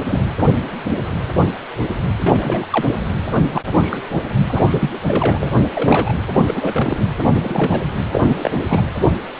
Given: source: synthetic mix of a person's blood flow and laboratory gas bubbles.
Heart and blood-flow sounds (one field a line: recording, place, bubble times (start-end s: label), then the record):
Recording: Doppler ultrasound of blood flow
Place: precordium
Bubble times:
0.00-0.26 s: bubbles
2.18-2.67 s: bubbles
2.70-2.88 s: bubbles
3.50-3.61 s: bubbles
3.80-4.01 s: bubbles
4.43-4.90 s: bubbles
5.06-5.51 s: bubbles
5.71-6.17 s: bubbles
6.34-7.06 s: bubbles
7.42-7.79 s: bubbles
8.12-8.51 s: bubbles
8.69-8.82 s: bubbles
From the record:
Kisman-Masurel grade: 232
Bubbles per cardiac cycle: several, 3 to 8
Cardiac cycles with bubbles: 50 to 99%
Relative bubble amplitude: moderate (0.250 to 0.450)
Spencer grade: 3 (all of the cardiac periods contain showers or single bubble signals, but not dominating or overriding the cardiac motion signals)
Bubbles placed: anywhere in the cardiac cycle